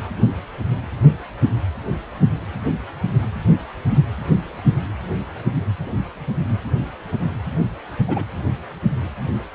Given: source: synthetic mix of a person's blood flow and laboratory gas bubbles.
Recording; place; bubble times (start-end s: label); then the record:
Doppler ultrasound of blood flow; precordium
8.07-8.23 s: bubbles
From the record:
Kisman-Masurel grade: 112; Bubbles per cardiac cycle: 1 to 2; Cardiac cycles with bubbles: 1 to 10%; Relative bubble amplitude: moderate (0.250 to 0.450); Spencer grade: 1 (occasional bubble signal discernible with the cardiac motion signal, with majority of cardiac periods free of bubbles); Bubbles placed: anywhere in the cardiac cycle